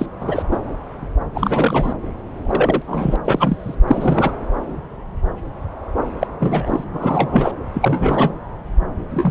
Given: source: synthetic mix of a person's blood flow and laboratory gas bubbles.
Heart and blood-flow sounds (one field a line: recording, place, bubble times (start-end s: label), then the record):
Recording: Doppler ultrasound of blood flow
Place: subclavian vein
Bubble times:
0.00-0.06 s: bubbles
0.20-0.43 s: bubbles
0.51-0.57 s: bubbles
1.34-1.94 s: bubbles
2.44-2.82 s: bubbles
2.87-3.16 s: bubbles
3.25-3.75 s: bubbles
3.88-4.32 s: bubbles
6.19-6.27 s: bubbles
6.40-6.88 s: bubbles
6.92-7.52 s: bubbles
7.74-8.34 s: bubbles
9.10-9.31 s: bubbles
From the record:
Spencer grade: 3 (all of the cardiac periods contain showers or single bubble signals, but not dominating or overriding the cardiac motion signals)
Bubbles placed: anywhere in the cardiac cycle